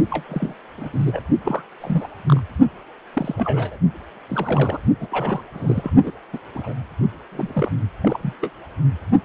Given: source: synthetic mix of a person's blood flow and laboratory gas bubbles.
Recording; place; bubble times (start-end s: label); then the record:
Doppler ultrasound of blood flow; precordium
0.11-0.23 s: bubbles
0.29-0.55 s: bubbles
0.77-0.89 s: bubbles
0.92-1.20 s: bubbles
1.44-1.62 s: bubbles
1.80-2.07 s: bubbles
2.28-2.41 s: bubbles
3.13-3.35 s: bubbles
3.38-3.78 s: bubbles
4.28-4.79 s: bubbles
5.00-5.08 s: bubbles
5.11-5.42 s: bubbles
5.53-5.89 s: bubbles
6.02-6.11 s: bubbles
6.33-6.38 s: bubbles
6.54-6.74 s: bubbles
7.31-7.72 s: bubbles
8.03-8.18 s: bubbles
8.23-8.34 s: bubbles
8.42-8.51 s: bubbles
From the record:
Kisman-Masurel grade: 242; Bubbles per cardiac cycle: several, 3 to 8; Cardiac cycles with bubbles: 100%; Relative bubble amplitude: moderate (0.250 to 0.450); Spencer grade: 3 (all of the cardiac periods contain showers or single bubble signals, but not dominating or overriding the cardiac motion signals); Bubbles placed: only in the low amplitude regions of the cardiac cycle